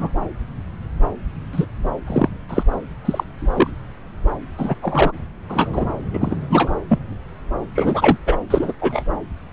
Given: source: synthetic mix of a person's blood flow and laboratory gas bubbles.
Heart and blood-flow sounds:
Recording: Doppler ultrasound of blood flow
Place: subclavian vein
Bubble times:
0.00-0.09 s: bubbles
1.52-1.66 s: bubbles
2.06-2.29 s: bubbles
2.49-2.63 s: bubbles
3.04-3.23 s: bubbles
3.38-3.71 s: bubbles
4.57-4.75 s: bubbles
4.81-5.12 s: bubbles
5.49-5.91 s: bubbles
6.13-6.36 s: bubbles
6.50-6.71 s: bubbles
6.88-6.99 s: bubbles
7.75-8.16 s: bubbles
8.26-8.36 s: bubbles
8.50-8.72 s: bubbles
8.81-9.16 s: bubbles
From the record:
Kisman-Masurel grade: 233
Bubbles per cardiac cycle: several, 3 to 8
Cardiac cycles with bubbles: 50 to 99%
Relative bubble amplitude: loud (0.450 to 0.775)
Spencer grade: 3 (all of the cardiac periods contain showers or single bubble signals, but not dominating or overriding the cardiac motion signals)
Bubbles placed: anywhere in the cardiac cycle

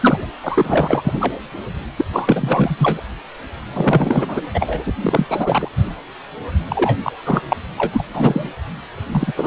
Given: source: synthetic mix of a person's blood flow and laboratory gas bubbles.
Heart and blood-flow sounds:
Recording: Doppler ultrasound of blood flow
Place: precordium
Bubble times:
0.00-0.26 s: bubbles
0.43-1.33 s: bubbles
1.97-2.04 s: bubbles
2.12-3.01 s: bubbles
3.73-4.41 s: bubbles
4.54-4.92 s: bubbles
4.96-5.68 s: bubbles
6.68-6.99 s: bubbles
7.04-7.12 s: bubbles
7.25-7.41 s: bubbles
7.48-7.57 s: bubbles
7.76-8.03 s: bubbles
8.15-8.50 s: bubbles
9.11-9.33 s: bubbles
9.37-9.47 s: bubbles
From the record:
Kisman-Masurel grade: 343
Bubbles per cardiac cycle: rolling drumbeat, 9 or more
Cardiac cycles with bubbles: 100%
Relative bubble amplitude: loud (0.450 to 0.775)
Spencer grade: 3 (all of the cardiac periods contain showers or single bubble signals, but not dominating or overriding the cardiac motion signals)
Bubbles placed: anywhere in the cardiac cycle

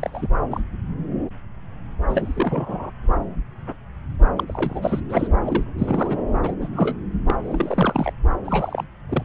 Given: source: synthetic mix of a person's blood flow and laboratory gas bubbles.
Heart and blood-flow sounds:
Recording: Doppler ultrasound of blood flow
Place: subclavian vein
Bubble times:
0.00-0.27 s: bubbles
0.50-0.60 s: bubbles
2.08-2.92 s: bubbles
4.37-4.44 s: bubbles
4.48-5.01 s: bubbles
5.09-5.29 s: bubbles
5.42-5.64 s: bubbles
5.78-6.19 s: bubbles
6.43-6.55 s: bubbles
6.61-6.69 s: bubbles
6.73-6.96 s: bubbles
7.27-7.36 s: bubbles
7.43-8.13 s: bubbles
8.45-8.84 s: bubbles
9.09-9.23 s: bubbles
From the record:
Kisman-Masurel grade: 232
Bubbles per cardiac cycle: several, 3 to 8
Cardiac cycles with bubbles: 50 to 99%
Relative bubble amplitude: moderate (0.250 to 0.450)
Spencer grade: 3 (all of the cardiac periods contain showers or single bubble signals, but not dominating or overriding the cardiac motion signals)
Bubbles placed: anywhere in the cardiac cycle

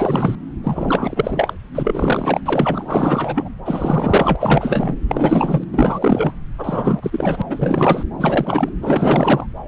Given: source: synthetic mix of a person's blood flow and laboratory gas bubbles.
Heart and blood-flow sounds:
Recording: Doppler ultrasound of blood flow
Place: subclavian vein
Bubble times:
0.00-0.35 s: bubbles
0.64-1.53 s: bubbles
1.74-2.40 s: bubbles
2.44-3.48 s: bubbles
3.65-4.36 s: bubbles
4.40-4.96 s: bubbles
5.08-5.64 s: bubbles
5.72-6.33 s: bubbles
6.58-7.42 s: bubbles
7.50-8.03 s: bubbles
8.18-8.69 s: bubbles
8.81-9.47 s: bubbles
From the record:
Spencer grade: 4 (maximum detectable bubble signal sounding continuously throughout systole and diastole of every cardiac period, and overriding the amplitude of the normal cardiac signals)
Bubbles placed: anywhere in the cardiac cycle

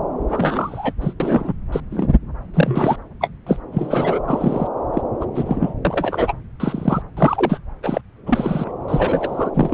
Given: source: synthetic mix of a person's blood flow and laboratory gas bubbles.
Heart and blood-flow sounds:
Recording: Doppler ultrasound of blood flow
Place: subclavian vein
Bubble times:
0.29-0.93 s: bubbles
1.01-1.13 s: bubbles
1.20-1.53 s: bubbles
1.72-1.80 s: bubbles
1.92-2.08 s: bubbles
2.54-2.96 s: bubbles
3.21-3.29 s: bubbles
3.47-3.58 s: bubbles
3.72-4.20 s: bubbles
4.27-4.67 s: bubbles
4.94-5.01 s: bubbles
5.21-5.25 s: bubbles
5.35-5.74 s: bubbles
5.84-6.33 s: bubbles
6.59-7.02 s: bubbles
7.17-7.58 s: bubbles
7.83-8.01 s: bubbles
8.26-8.71 s: bubbles
8.88-9.50 s: bubbles
9.54-9.74 s: bubbles
From the record:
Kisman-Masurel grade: 242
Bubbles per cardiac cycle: several, 3 to 8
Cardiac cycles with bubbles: 100%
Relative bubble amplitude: moderate (0.250 to 0.450)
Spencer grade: 3 (all of the cardiac periods contain showers or single bubble signals, but not dominating or overriding the cardiac motion signals)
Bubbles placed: anywhere in the cardiac cycle

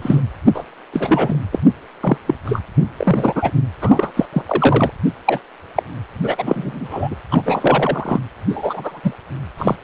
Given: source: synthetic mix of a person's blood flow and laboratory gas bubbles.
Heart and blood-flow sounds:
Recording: Doppler ultrasound of blood flow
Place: precordium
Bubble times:
0.01-0.21 s: bubbles
0.46-0.64 s: bubbles
0.92-1.40 s: bubbles
1.51-1.58 s: bubbles
2.00-2.17 s: bubbles
2.27-2.34 s: bubbles
2.44-2.61 s: bubbles
2.97-3.50 s: bubbles
3.81-4.11 s: bubbles
4.16-4.27 s: bubbles
4.33-4.42 s: bubbles
4.46-4.91 s: bubbles
5.25-5.39 s: bubbles
5.75-5.83 s: bubbles
6.23-7.15 s: bubbles
7.30-7.42 s: bubbles
7.45-8.20 s: bubbles
8.48-9.00 s: bubbles
9.03-9.13 s: bubbles
9.57-9.76 s: bubbles
From the record:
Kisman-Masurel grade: 243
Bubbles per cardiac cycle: several, 3 to 8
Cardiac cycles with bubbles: 100%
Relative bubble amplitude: loud (0.450 to 0.775)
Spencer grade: 3 (all of the cardiac periods contain showers or single bubble signals, but not dominating or overriding the cardiac motion signals)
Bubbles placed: anywhere in the cardiac cycle

